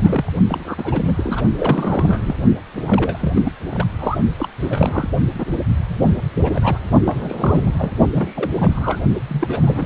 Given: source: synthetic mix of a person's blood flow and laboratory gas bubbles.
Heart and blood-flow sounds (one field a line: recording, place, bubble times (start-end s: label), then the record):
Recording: Doppler ultrasound of blood flow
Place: precordium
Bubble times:
0.00-0.34 s: bubbles
0.47-1.43 s: bubbles
1.56-2.35 s: bubbles
2.74-3.33 s: bubbles
3.35-3.43 s: bubbles
3.45-3.52 s: bubbles
3.71-3.85 s: bubbles
3.98-4.18 s: bubbles
4.38-4.48 s: bubbles
4.59-5.10 s: bubbles
5.34-5.44 s: bubbles
5.88-6.14 s: bubbles
6.34-6.79 s: bubbles
7.04-7.71 s: bubbles
7.77-7.92 s: bubbles
8.13-8.99 s: bubbles
9.28-9.86 s: bubbles
From the record:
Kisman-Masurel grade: 342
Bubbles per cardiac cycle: rolling drumbeat, 9 or more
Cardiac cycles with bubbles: 100%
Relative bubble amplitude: moderate (0.250 to 0.450)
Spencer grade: 3 (all of the cardiac periods contain showers or single bubble signals, but not dominating or overriding the cardiac motion signals)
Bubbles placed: only in the low amplitude regions of the cardiac cycle